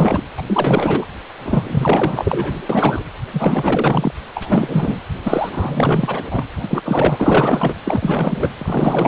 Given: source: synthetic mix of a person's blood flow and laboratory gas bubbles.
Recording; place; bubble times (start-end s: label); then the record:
Doppler ultrasound of blood flow; precordium
0.00-0.25 s: bubbles
0.37-0.43 s: bubbles
0.47-1.06 s: bubbles
1.44-2.53 s: bubbles
2.69-3.03 s: bubbles
3.32-4.14 s: bubbles
4.35-5.04 s: bubbles
5.24-5.50 s: bubbles
5.52-6.24 s: bubbles
6.31-6.45 s: bubbles
6.57-7.75 s: bubbles
7.85-8.52 s: bubbles
8.58-9.08 s: bubbles
From the record:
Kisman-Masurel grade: 444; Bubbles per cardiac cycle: continuous sound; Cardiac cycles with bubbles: 100%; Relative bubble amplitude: maximal (0.775 to 0.999); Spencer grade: 4 (maximum detectable bubble signal sounding continuously throughout systole and diastole of every cardiac period, and overriding the amplitude of the normal cardiac signals); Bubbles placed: anywhere in the cardiac cycle